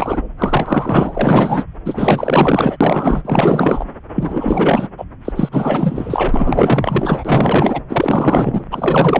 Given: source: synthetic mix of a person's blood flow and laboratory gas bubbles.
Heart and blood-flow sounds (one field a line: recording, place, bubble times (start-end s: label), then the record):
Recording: Doppler ultrasound of blood flow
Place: subclavian vein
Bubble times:
0.00-0.21 s: bubbles
0.38-1.64 s: bubbles
1.85-2.77 s: bubbles
2.81-3.21 s: bubbles
3.25-3.84 s: bubbles
4.15-4.88 s: bubbles
4.97-5.05 s: bubbles
5.25-5.33 s: bubbles
5.36-7.82 s: bubbles
7.89-8.63 s: bubbles
8.71-9.20 s: bubbles
From the record:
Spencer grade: 4 (maximum detectable bubble signal sounding continuously throughout systole and diastole of every cardiac period, and overriding the amplitude of the normal cardiac signals)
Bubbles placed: anywhere in the cardiac cycle